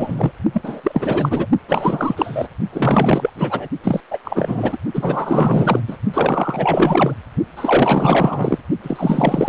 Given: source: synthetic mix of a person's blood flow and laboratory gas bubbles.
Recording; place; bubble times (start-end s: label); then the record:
Doppler ultrasound of blood flow; precordium
0.00-0.31 s: bubbles
0.53-0.80 s: bubbles
0.83-1.46 s: bubbles
1.68-2.48 s: bubbles
2.72-3.30 s: bubbles
3.36-3.68 s: bubbles
3.83-4.01 s: bubbles
4.11-4.19 s: bubbles
4.24-4.77 s: bubbles
4.94-5.82 s: bubbles
5.88-5.97 s: bubbles
6.14-7.19 s: bubbles
7.57-8.58 s: bubbles
8.82-9.49 s: bubbles
From the record:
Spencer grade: 4 (maximum detectable bubble signal sounding continuously throughout systole and diastole of every cardiac period, and overriding the amplitude of the normal cardiac signals); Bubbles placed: only in the low amplitude regions of the cardiac cycle